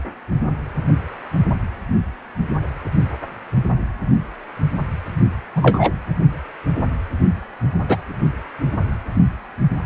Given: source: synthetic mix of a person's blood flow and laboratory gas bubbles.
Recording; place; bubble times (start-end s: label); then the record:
Doppler ultrasound of blood flow; precordium
5.55-5.92 s: bubbles
7.88-7.97 s: bubbles
From the record:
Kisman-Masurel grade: 123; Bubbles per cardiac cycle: 1 to 2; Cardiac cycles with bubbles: 10 to 50%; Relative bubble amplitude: loud (0.450 to 0.775); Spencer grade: 2 (many but less than half of the cardiac periods contain bubble signals, singularly or in groups); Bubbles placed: anywhere in the cardiac cycle